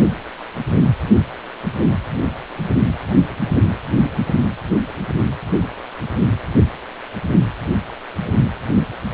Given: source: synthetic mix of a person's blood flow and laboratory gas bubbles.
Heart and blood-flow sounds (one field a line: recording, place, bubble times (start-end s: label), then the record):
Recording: Doppler ultrasound of blood flow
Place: precordium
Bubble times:
no bubbles
From the record:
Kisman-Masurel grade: 000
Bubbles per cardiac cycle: 0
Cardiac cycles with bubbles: 0%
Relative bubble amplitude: no bubbles discernible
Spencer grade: 0 (complete lack of bubble signals)